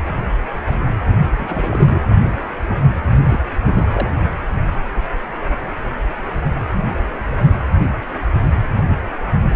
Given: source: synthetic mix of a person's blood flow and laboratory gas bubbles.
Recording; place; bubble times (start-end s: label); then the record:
Doppler ultrasound of blood flow; precordium
1.38-2.02 s: bubbles
3.29-3.40 s: bubbles
3.67-4.13 s: bubbles
From the record:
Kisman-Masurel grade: 222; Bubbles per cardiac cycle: several, 3 to 8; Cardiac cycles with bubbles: 10 to 50%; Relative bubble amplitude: moderate (0.250 to 0.450); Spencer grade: 2 (many but less than half of the cardiac periods contain bubble signals, singularly or in groups); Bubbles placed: only in the low amplitude regions of the cardiac cycle